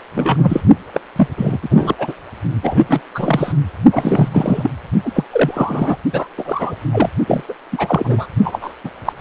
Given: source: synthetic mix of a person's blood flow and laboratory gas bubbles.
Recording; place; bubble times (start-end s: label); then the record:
Doppler ultrasound of blood flow; precordium
0.14-0.61 s: bubbles
0.93-1.00 s: bubbles
1.15-1.27 s: bubbles
1.37-1.58 s: bubbles
1.62-1.96 s: bubbles
1.98-2.14 s: bubbles
2.63-2.84 s: bubbles
2.88-3.00 s: bubbles
3.14-3.52 s: bubbles
3.91-4.71 s: bubbles
5.04-5.24 s: bubbles
5.31-5.97 s: bubbles
6.12-6.27 s: bubbles
6.37-6.75 s: bubbles
6.92-7.09 s: bubbles
7.26-7.44 s: bubbles
7.48-7.54 s: bubbles
7.72-8.27 s: bubbles
8.44-8.73 s: bubbles
8.84-8.91 s: bubbles
9.05-9.12 s: bubbles
9.18-9.21 s: bubbles
From the record:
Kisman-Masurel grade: 343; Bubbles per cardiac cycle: rolling drumbeat, 9 or more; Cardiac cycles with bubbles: 100%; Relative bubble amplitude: loud (0.450 to 0.775); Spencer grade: 3 (all of the cardiac periods contain showers or single bubble signals, but not dominating or overriding the cardiac motion signals); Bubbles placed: only in the low amplitude regions of the cardiac cycle